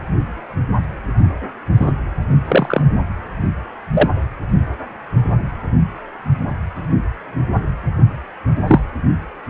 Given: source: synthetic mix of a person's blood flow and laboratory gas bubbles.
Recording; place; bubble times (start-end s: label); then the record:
Doppler ultrasound of blood flow; precordium
1.79-1.92 s: bubbles
2.45-2.82 s: bubbles
3.94-4.09 s: bubbles
8.67-8.80 s: bubbles
From the record:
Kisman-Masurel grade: 123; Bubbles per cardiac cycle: 1 to 2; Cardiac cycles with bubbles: 10 to 50%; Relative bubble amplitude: loud (0.450 to 0.775); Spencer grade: 2 (many but less than half of the cardiac periods contain bubble signals, singularly or in groups); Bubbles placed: anywhere in the cardiac cycle